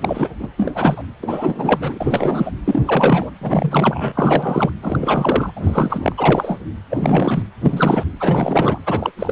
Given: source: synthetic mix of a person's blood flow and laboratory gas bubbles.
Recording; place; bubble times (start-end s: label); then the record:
Doppler ultrasound of blood flow; precordium
0.00-0.28 s: bubbles
0.39-0.49 s: bubbles
0.57-0.71 s: bubbles
0.74-1.03 s: bubbles
1.22-2.52 s: bubbles
2.65-2.81 s: bubbles
2.85-3.31 s: bubbles
3.41-4.70 s: bubbles
4.82-5.51 s: bubbles
5.56-6.14 s: bubbles
6.17-6.59 s: bubbles
6.90-7.43 s: bubbles
7.61-8.04 s: bubbles
8.20-8.79 s: bubbles
8.86-9.12 s: bubbles
9.17-9.32 s: bubbles
From the record:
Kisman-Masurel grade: 343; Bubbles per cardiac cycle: rolling drumbeat, 9 or more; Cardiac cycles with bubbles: 100%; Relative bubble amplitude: loud (0.450 to 0.775); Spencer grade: 3 (all of the cardiac periods contain showers or single bubble signals, but not dominating or overriding the cardiac motion signals); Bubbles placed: anywhere in the cardiac cycle